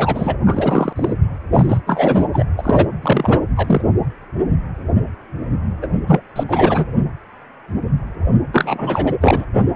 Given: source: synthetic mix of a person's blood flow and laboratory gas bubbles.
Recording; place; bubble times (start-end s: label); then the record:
Doppler ultrasound of blood flow; precordium
0.00-0.35 s: bubbles
0.46-0.93 s: bubbles
0.95-1.14 s: bubbles
1.53-1.81 s: bubbles
1.86-2.25 s: bubbles
2.33-2.45 s: bubbles
2.58-2.87 s: bubbles
3.02-3.38 s: bubbles
3.56-3.83 s: bubbles
5.82-5.87 s: bubbles
6.07-6.20 s: bubbles
6.35-6.43 s: bubbles
6.48-6.85 s: bubbles
8.52-9.13 s: bubbles
9.21-9.45 s: bubbles
From the record:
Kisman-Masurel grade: 333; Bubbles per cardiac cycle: rolling drumbeat, 9 or more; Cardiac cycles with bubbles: 50 to 99%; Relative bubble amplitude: loud (0.450 to 0.775); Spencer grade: 3 (all of the cardiac periods contain showers or single bubble signals, but not dominating or overriding the cardiac motion signals); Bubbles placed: only in the low amplitude regions of the cardiac cycle